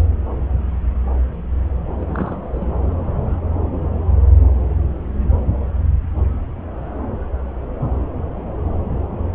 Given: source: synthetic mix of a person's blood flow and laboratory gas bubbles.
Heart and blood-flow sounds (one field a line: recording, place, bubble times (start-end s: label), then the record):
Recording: Doppler ultrasound of blood flow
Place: subclavian vein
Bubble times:
1.99-2.49 s: bubbles
2.52-2.66 s: bubbles
From the record:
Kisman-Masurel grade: 211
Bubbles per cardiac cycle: several, 3 to 8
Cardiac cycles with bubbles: 1 to 10%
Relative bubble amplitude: barely perceptible (0.100 to 0.250)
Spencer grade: 1 (occasional bubble signal discernible with the cardiac motion signal, with majority of cardiac periods free of bubbles)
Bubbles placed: anywhere in the cardiac cycle